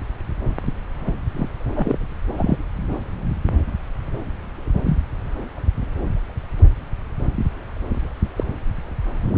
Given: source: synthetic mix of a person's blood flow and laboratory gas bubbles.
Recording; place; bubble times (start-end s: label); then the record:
Doppler ultrasound of blood flow; subclavian vein
1.06-1.12 s: bubbles
1.33-1.48 s: bubbles
1.74-2.08 s: bubbles
2.38-2.57 s: bubbles
4.86-4.97 s: bubbles
8.36-8.44 s: bubbles
From the record:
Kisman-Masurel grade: 122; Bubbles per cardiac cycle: 1 to 2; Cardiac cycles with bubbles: 10 to 50%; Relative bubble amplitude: moderate (0.250 to 0.450); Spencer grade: 2 (many but less than half of the cardiac periods contain bubble signals, singularly or in groups); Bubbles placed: anywhere in the cardiac cycle